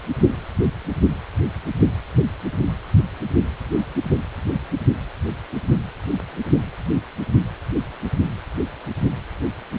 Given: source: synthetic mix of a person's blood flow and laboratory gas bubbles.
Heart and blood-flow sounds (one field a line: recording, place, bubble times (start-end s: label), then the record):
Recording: Doppler ultrasound of blood flow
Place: precordium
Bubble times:
5.52-5.57 s: bubbles
From the record:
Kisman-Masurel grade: 111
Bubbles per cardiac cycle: 1 to 2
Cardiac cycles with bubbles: 1 to 10%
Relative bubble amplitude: barely perceptible (0.100 to 0.250)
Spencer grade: 1 (occasional bubble signal discernible with the cardiac motion signal, with majority of cardiac periods free of bubbles)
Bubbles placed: only in the low amplitude regions of the cardiac cycle